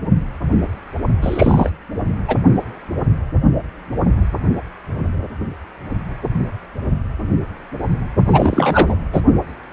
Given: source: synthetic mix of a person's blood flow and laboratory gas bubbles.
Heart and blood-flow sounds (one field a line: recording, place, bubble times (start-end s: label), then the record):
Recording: Doppler ultrasound of blood flow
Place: precordium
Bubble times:
1.22-1.70 s: bubbles
2.27-2.36 s: bubbles
8.25-8.95 s: bubbles
9.12-9.21 s: bubbles
From the record:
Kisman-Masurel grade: 223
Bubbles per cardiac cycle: several, 3 to 8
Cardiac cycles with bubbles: 10 to 50%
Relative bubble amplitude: loud (0.450 to 0.775)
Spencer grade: 2 (many but less than half of the cardiac periods contain bubble signals, singularly or in groups)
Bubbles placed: only in the low amplitude regions of the cardiac cycle